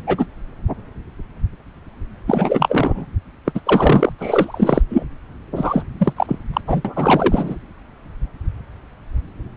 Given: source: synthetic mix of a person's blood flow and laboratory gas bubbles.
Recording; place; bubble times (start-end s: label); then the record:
Doppler ultrasound of blood flow; subclavian vein
0.07-0.26 s: bubbles
2.27-3.06 s: bubbles
3.46-3.52 s: bubbles
3.54-3.60 s: bubbles
3.66-4.12 s: bubbles
4.19-4.82 s: bubbles
4.90-5.05 s: bubbles
5.55-5.83 s: bubbles
5.99-6.13 s: bubbles
6.17-6.38 s: bubbles
6.53-6.61 s: bubbles
6.67-6.82 s: bubbles
6.84-7.56 s: bubbles
From the record:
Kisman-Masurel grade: 333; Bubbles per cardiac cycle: rolling drumbeat, 9 or more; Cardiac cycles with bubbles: 50 to 99%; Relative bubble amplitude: loud (0.450 to 0.775); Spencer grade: 3 (all of the cardiac periods contain showers or single bubble signals, but not dominating or overriding the cardiac motion signals); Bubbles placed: anywhere in the cardiac cycle